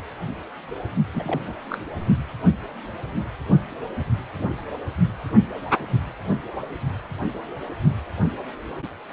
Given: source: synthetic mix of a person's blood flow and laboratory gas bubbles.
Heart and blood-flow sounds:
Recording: Doppler ultrasound of blood flow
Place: precordium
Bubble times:
1.12-1.55 s: bubbles
1.68-1.77 s: bubbles
From the record:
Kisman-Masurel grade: 211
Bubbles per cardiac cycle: several, 3 to 8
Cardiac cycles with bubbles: 1 to 10%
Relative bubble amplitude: barely perceptible (0.100 to 0.250)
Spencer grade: 1 (occasional bubble signal discernible with the cardiac motion signal, with majority of cardiac periods free of bubbles)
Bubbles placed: only in the low amplitude regions of the cardiac cycle

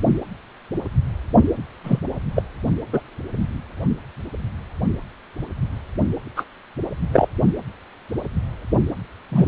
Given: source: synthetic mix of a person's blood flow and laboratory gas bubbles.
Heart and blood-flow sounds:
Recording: Doppler ultrasound of blood flow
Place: precordium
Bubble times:
1.83-2.00 s: bubbles
2.36-2.42 s: bubbles
2.92-3.00 s: bubbles
6.36-6.44 s: bubbles
7.12-7.28 s: bubbles
9.31-9.45 s: bubbles
From the record:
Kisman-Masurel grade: 123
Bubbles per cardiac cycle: 1 to 2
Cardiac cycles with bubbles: 10 to 50%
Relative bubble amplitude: loud (0.450 to 0.775)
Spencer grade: 2 (many but less than half of the cardiac periods contain bubble signals, singularly or in groups)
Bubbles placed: only in the low amplitude regions of the cardiac cycle

